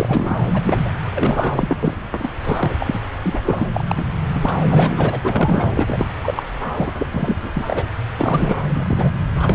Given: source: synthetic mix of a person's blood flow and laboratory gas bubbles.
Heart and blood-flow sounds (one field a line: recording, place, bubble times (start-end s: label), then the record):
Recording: Doppler ultrasound of blood flow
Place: subclavian vein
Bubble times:
0.00-0.43 s: bubbles
0.51-0.62 s: bubbles
0.65-0.92 s: bubbles
1.15-1.51 s: bubbles
1.55-1.95 s: bubbles
2.19-2.29 s: bubbles
2.44-2.71 s: bubbles
2.79-3.01 s: bubbles
3.24-3.41 s: bubbles
3.46-3.68 s: bubbles
3.75-3.84 s: bubbles
3.88-4.06 s: bubbles
4.33-4.59 s: bubbles
4.69-5.71 s: bubbles
5.73-6.05 s: bubbles
6.23-6.43 s: bubbles
6.74-6.93 s: bubbles
6.98-7.06 s: bubbles
7.11-7.36 s: bubbles
7.43-7.50 s: bubbles
7.54-7.83 s: bubbles
8.18-8.62 s: bubbles
8.75-9.12 s: bubbles
9.40-9.54 s: bubbles
From the record:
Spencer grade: 3 (all of the cardiac periods contain showers or single bubble signals, but not dominating or overriding the cardiac motion signals)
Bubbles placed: anywhere in the cardiac cycle